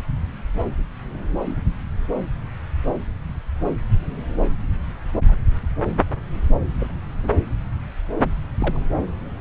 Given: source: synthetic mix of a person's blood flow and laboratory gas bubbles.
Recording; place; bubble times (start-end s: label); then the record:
Doppler ultrasound of blood flow; subclavian vein
1.45-1.59 s: bubbles
5.29-5.35 s: bubbles
6.79-6.94 s: bubbles
7.23-7.29 s: bubbles
8.58-8.80 s: bubbles
From the record:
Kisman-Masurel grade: 121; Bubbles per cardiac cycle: 1 to 2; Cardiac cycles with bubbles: 10 to 50%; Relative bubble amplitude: barely perceptible (0.100 to 0.250); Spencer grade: 2 (many but less than half of the cardiac periods contain bubble signals, singularly or in groups); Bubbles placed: anywhere in the cardiac cycle